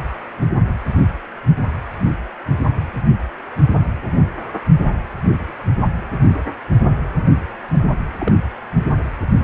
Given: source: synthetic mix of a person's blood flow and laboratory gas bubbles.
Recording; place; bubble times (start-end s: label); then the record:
Doppler ultrasound of blood flow; precordium
0.40-0.55 s: bubbles
8.18-8.32 s: bubbles
From the record:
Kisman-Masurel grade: 122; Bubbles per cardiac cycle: 1 to 2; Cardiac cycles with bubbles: 10 to 50%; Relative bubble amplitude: moderate (0.250 to 0.450); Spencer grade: 2 (many but less than half of the cardiac periods contain bubble signals, singularly or in groups); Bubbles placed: only in the low amplitude regions of the cardiac cycle